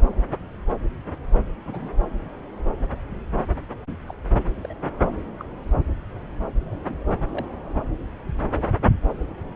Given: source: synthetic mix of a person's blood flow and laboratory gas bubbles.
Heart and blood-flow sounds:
Doppler ultrasound of blood flow; subclavian vein
1.65-1.89 s: bubbles
4.06-4.15 s: bubbles
4.64-4.67 s: bubbles
4.69-4.74 s: bubbles
5.38-5.43 s: bubbles
6.59-7.04 s: bubbles
7.32-7.49 s: bubbles
From the record:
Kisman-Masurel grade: 121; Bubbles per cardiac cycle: 1 to 2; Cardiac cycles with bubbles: 10 to 50%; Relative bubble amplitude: barely perceptible (0.100 to 0.250); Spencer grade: 2 (many but less than half of the cardiac periods contain bubble signals, singularly or in groups); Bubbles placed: anywhere in the cardiac cycle

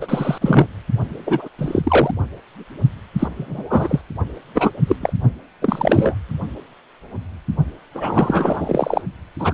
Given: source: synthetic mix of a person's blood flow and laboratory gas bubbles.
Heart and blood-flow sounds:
Doppler ultrasound of blood flow; precordium
0.01-0.38 s: bubbles
0.41-0.67 s: bubbles
1.26-1.48 s: bubbles
1.58-2.11 s: bubbles
3.19-3.28 s: bubbles
3.37-4.01 s: bubbles
4.54-4.70 s: bubbles
4.87-4.96 s: bubbles
5.01-5.13 s: bubbles
5.61-6.17 s: bubbles
7.94-9.02 s: bubbles
9.39-9.54 s: bubbles
From the record:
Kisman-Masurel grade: 233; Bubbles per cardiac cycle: several, 3 to 8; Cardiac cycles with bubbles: 50 to 99%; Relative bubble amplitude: loud (0.450 to 0.775); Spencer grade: 3 (all of the cardiac periods contain showers or single bubble signals, but not dominating or overriding the cardiac motion signals); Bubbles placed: only in the low amplitude regions of the cardiac cycle

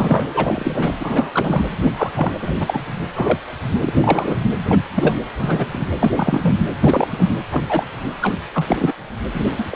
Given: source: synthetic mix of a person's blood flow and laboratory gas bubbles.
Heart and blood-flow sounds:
Doppler ultrasound of blood flow; precordium
0.00-0.26 s: bubbles
0.34-0.92 s: bubbles
0.99-1.31 s: bubbles
1.33-1.64 s: bubbles
1.82-1.92 s: bubbles
1.97-2.10 s: bubbles
2.15-2.33 s: bubbles
2.41-2.81 s: bubbles
3.15-3.38 s: bubbles
3.83-3.93 s: bubbles
4.00-4.36 s: bubbles
4.68-4.81 s: bubbles
4.94-5.17 s: bubbles
5.40-5.67 s: bubbles
5.71-5.87 s: bubbles
6.00-6.11 s: bubbles
6.15-6.54 s: bubbles
6.81-7.34 s: bubbles
7.51-7.87 s: bubbles
8.21-8.38 s: bubbles
8.54-8.77 s: bubbles
8.79-8.94 s: bubbles
9.34-9.44 s: bubbles
9.58-9.65 s: bubbles
9.71-9.76 s: bubbles
From the record:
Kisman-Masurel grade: 243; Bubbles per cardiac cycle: several, 3 to 8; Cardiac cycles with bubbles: 100%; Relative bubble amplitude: loud (0.450 to 0.775); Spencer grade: 3 (all of the cardiac periods contain showers or single bubble signals, but not dominating or overriding the cardiac motion signals); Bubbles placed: anywhere in the cardiac cycle

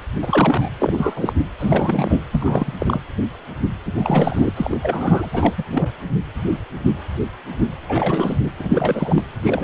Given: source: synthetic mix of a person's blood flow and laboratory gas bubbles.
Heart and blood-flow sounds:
Doppler ultrasound of blood flow; precordium
0.22-0.69 s: bubbles
0.79-1.33 s: bubbles
1.58-2.23 s: bubbles
2.31-2.73 s: bubbles
2.78-2.99 s: bubbles
3.85-3.93 s: bubbles
3.95-4.53 s: bubbles
4.57-4.79 s: bubbles
4.82-5.29 s: bubbles
5.33-5.54 s: bubbles
5.58-5.63 s: bubbles
5.72-5.91 s: bubbles
7.89-8.37 s: bubbles
8.43-8.51 s: bubbles
8.59-9.23 s: bubbles
9.42-9.64 s: bubbles
From the record:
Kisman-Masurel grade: 332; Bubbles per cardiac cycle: rolling drumbeat, 9 or more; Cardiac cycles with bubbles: 50 to 99%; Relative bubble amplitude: moderate (0.250 to 0.450); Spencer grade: 3 (all of the cardiac periods contain showers or single bubble signals, but not dominating or overriding the cardiac motion signals); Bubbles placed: anywhere in the cardiac cycle

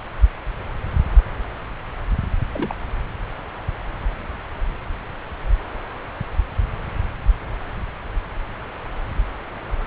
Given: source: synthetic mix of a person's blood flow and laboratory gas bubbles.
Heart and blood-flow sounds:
Doppler ultrasound of blood flow; subclavian vein
2.52-2.75 s: bubbles
From the record:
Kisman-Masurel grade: 121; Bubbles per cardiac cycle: 1 to 2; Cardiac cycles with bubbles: 10 to 50%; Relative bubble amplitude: barely perceptible (0.100 to 0.250); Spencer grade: 2 (many but less than half of the cardiac periods contain bubble signals, singularly or in groups); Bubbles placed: anywhere in the cardiac cycle

